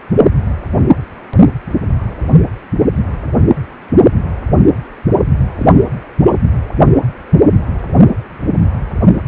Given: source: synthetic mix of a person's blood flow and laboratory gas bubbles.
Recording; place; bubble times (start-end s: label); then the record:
Doppler ultrasound of blood flow; precordium
5.57-5.67 s: bubbles
6.25-6.36 s: bubbles
From the record:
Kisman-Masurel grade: 112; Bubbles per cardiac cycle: 1 to 2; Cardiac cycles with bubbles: 1 to 10%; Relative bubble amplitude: moderate (0.250 to 0.450); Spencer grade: 1 (occasional bubble signal discernible with the cardiac motion signal, with majority of cardiac periods free of bubbles); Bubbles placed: only in the low amplitude regions of the cardiac cycle